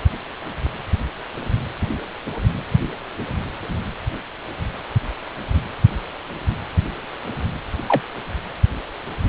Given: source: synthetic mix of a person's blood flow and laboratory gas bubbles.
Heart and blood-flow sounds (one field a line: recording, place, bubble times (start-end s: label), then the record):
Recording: Doppler ultrasound of blood flow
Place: precordium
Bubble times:
7.87-8.02 s: bubbles
From the record:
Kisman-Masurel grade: 112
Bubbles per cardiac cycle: 1 to 2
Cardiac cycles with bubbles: 1 to 10%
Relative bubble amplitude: moderate (0.250 to 0.450)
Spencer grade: 1 (occasional bubble signal discernible with the cardiac motion signal, with majority of cardiac periods free of bubbles)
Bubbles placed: anywhere in the cardiac cycle